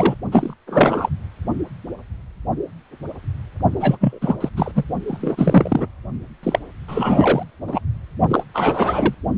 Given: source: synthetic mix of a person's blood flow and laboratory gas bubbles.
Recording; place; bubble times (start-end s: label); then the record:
Doppler ultrasound of blood flow; precordium
0.00-0.15 s: bubbles
0.32-0.54 s: bubbles
0.67-1.09 s: bubbles
3.72-3.97 s: bubbles
4.00-4.18 s: bubbles
4.21-4.49 s: bubbles
4.56-4.71 s: bubbles
4.75-4.84 s: bubbles
5.07-5.87 s: bubbles
6.43-6.59 s: bubbles
6.88-7.43 s: bubbles
7.67-7.80 s: bubbles
8.29-8.44 s: bubbles
8.54-9.14 s: bubbles
From the record:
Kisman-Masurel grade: 333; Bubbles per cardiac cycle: rolling drumbeat, 9 or more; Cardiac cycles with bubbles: 50 to 99%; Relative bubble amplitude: loud (0.450 to 0.775); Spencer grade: 3 (all of the cardiac periods contain showers or single bubble signals, but not dominating or overriding the cardiac motion signals); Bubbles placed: only in the low amplitude regions of the cardiac cycle